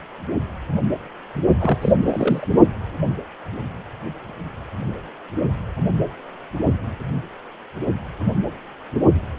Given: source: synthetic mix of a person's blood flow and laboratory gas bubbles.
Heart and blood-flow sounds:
Doppler ultrasound of blood flow; precordium
1.60-1.78 s: bubbles
1.81-1.92 s: bubbles
1.99-2.48 s: bubbles
From the record:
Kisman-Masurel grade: 212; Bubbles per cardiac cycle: several, 3 to 8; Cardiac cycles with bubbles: 1 to 10%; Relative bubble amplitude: moderate (0.250 to 0.450); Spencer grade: 1 (occasional bubble signal discernible with the cardiac motion signal, with majority of cardiac periods free of bubbles); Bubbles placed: only in the low amplitude regions of the cardiac cycle

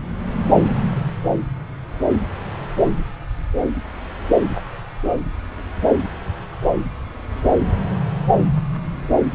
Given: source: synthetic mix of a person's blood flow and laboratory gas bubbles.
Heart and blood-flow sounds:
Doppler ultrasound of blood flow; subclavian vein
no bubbles
From the record:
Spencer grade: 0 (complete lack of bubble signals)

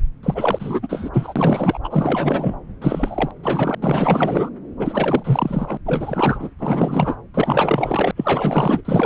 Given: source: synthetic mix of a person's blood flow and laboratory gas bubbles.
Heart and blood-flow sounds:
Doppler ultrasound of blood flow; subclavian vein
0.23-1.09 s: bubbles
1.12-1.79 s: bubbles
1.83-2.56 s: bubbles
2.81-3.31 s: bubbles
3.42-3.75 s: bubbles
3.81-4.50 s: bubbles
4.79-5.78 s: bubbles
5.84-6.49 s: bubbles
6.58-7.16 s: bubbles
7.34-8.11 s: bubbles
8.16-8.81 s: bubbles
8.84-9.06 s: bubbles
From the record:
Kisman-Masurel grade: 444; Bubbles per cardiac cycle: continuous sound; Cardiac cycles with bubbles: 100%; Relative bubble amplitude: maximal (0.775 to 0.999); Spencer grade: 4 (maximum detectable bubble signal sounding continuously throughout systole and diastole of every cardiac period, and overriding the amplitude of the normal cardiac signals); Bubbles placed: anywhere in the cardiac cycle

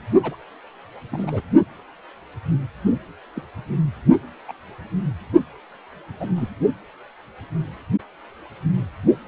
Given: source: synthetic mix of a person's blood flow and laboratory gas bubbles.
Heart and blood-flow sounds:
Doppler ultrasound of blood flow; precordium
0.22-0.36 s: bubbles
1.11-1.41 s: bubbles
3.36-3.42 s: bubbles
4.48-4.53 s: bubbles
6.20-6.28 s: bubbles
6.36-6.49 s: bubbles
From the record:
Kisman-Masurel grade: 121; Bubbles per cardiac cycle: 1 to 2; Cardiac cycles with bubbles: 10 to 50%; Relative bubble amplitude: barely perceptible (0.100 to 0.250); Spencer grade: 2 (many but less than half of the cardiac periods contain bubble signals, singularly or in groups); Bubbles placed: only in the low amplitude regions of the cardiac cycle

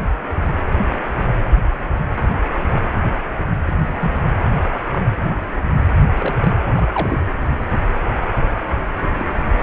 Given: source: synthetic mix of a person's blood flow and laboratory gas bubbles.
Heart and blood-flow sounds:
Doppler ultrasound of blood flow; precordium
3.67-3.71 s: bubbles
3.82-4.28 s: bubbles
4.92-4.99 s: bubbles
6.16-6.52 s: bubbles
6.75-7.19 s: bubbles
9.18-9.26 s: bubbles
From the record:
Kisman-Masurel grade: 122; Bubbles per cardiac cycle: 1 to 2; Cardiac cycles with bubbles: 10 to 50%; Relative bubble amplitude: moderate (0.250 to 0.450); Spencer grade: 2 (many but less than half of the cardiac periods contain bubble signals, singularly or in groups); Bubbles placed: anywhere in the cardiac cycle

